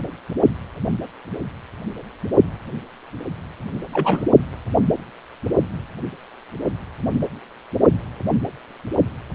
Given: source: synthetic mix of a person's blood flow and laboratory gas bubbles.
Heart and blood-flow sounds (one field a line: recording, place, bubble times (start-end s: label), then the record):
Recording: Doppler ultrasound of blood flow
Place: precordium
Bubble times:
3.89-4.25 s: bubbles
From the record:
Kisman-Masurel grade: 212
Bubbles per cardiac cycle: several, 3 to 8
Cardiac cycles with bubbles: 1 to 10%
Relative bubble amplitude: moderate (0.250 to 0.450)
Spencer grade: 1 (occasional bubble signal discernible with the cardiac motion signal, with majority of cardiac periods free of bubbles)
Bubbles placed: anywhere in the cardiac cycle